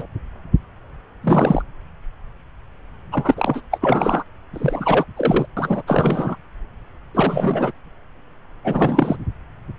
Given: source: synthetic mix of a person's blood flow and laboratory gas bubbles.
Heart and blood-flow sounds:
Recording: Doppler ultrasound of blood flow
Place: subclavian vein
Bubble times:
0.00-0.06 s: bubbles
1.23-1.62 s: bubbles
3.12-3.61 s: bubbles
3.71-3.78 s: bubbles
3.81-4.24 s: bubbles
4.54-5.05 s: bubbles
5.16-5.47 s: bubbles
5.57-5.83 s: bubbles
5.87-6.36 s: bubbles
7.14-7.72 s: bubbles
8.64-9.16 s: bubbles
From the record:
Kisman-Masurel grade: 332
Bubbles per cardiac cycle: rolling drumbeat, 9 or more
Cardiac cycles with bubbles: 50 to 99%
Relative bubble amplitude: moderate (0.250 to 0.450)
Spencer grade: 3 (all of the cardiac periods contain showers or single bubble signals, but not dominating or overriding the cardiac motion signals)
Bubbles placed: anywhere in the cardiac cycle

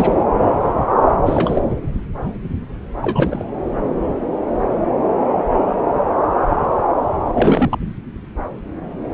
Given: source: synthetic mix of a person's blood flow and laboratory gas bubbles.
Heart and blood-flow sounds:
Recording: Doppler ultrasound of blood flow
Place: subclavian vein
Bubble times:
0.00-0.24 s: bubbles
1.25-1.62 s: bubbles
3.02-3.44 s: bubbles
7.29-7.76 s: bubbles
From the record:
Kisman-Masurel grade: 222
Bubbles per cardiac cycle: several, 3 to 8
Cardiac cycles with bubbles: 10 to 50%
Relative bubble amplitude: moderate (0.250 to 0.450)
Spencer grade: 2 (many but less than half of the cardiac periods contain bubble signals, singularly or in groups)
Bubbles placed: anywhere in the cardiac cycle

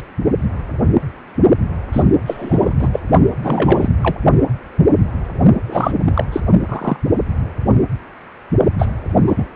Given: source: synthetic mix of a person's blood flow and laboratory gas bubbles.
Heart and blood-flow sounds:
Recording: Doppler ultrasound of blood flow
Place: precordium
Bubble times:
1.93-2.03 s: bubbles
2.26-2.74 s: bubbles
2.79-2.89 s: bubbles
2.92-3.00 s: bubbles
3.43-3.90 s: bubbles
4.03-4.17 s: bubbles
5.67-5.93 s: bubbles
6.06-6.25 s: bubbles
6.32-6.41 s: bubbles
6.68-6.96 s: bubbles
8.79-8.88 s: bubbles
9.27-9.33 s: bubbles
9.35-9.46 s: bubbles
From the record:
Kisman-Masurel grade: 233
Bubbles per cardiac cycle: several, 3 to 8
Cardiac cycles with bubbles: 50 to 99%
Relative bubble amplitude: loud (0.450 to 0.775)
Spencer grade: 3 (all of the cardiac periods contain showers or single bubble signals, but not dominating or overriding the cardiac motion signals)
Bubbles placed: only in the low amplitude regions of the cardiac cycle

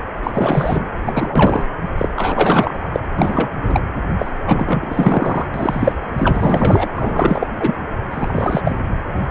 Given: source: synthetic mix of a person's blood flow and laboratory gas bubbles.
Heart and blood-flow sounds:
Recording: Doppler ultrasound of blood flow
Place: precordium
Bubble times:
0.00-0.03 s: bubbles
0.23-0.88 s: bubbles
1.06-1.65 s: bubbles
1.97-2.09 s: bubbles
2.16-2.87 s: bubbles
2.93-3.00 s: bubbles
3.18-3.50 s: bubbles
3.62-3.83 s: bubbles
4.18-4.33 s: bubbles
4.46-5.46 s: bubbles
5.54-5.92 s: bubbles
6.17-6.89 s: bubbles
6.95-7.46 s: bubbles
7.60-7.75 s: bubbles
8.11-8.80 s: bubbles
From the record:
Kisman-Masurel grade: 333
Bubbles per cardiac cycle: rolling drumbeat, 9 or more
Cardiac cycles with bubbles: 50 to 99%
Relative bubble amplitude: loud (0.450 to 0.775)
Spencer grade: 3 (all of the cardiac periods contain showers or single bubble signals, but not dominating or overriding the cardiac motion signals)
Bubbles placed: anywhere in the cardiac cycle

